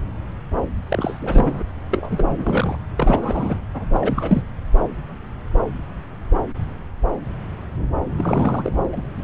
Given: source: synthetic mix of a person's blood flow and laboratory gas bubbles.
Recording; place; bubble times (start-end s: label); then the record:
Doppler ultrasound of blood flow; subclavian vein
0.89-1.63 s: bubbles
1.91-2.25 s: bubbles
2.38-2.78 s: bubbles
2.97-3.59 s: bubbles
3.74-3.86 s: bubbles
3.93-4.42 s: bubbles
8.17-9.02 s: bubbles
From the record:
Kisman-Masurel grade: 332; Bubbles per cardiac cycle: rolling drumbeat, 9 or more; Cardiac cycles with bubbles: 50 to 99%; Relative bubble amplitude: moderate (0.250 to 0.450); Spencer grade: 3 (all of the cardiac periods contain showers or single bubble signals, but not dominating or overriding the cardiac motion signals); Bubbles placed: anywhere in the cardiac cycle